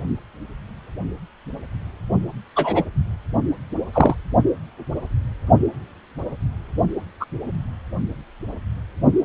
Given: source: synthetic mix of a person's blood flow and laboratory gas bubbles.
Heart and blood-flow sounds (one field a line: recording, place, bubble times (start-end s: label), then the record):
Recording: Doppler ultrasound of blood flow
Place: precordium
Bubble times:
2.55-2.82 s: bubbles
3.94-4.15 s: bubbles
7.20-7.25 s: bubbles
From the record:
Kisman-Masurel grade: 123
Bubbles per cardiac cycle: 1 to 2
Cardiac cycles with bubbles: 10 to 50%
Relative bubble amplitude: loud (0.450 to 0.775)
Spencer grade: 2 (many but less than half of the cardiac periods contain bubble signals, singularly or in groups)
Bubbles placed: only in the low amplitude regions of the cardiac cycle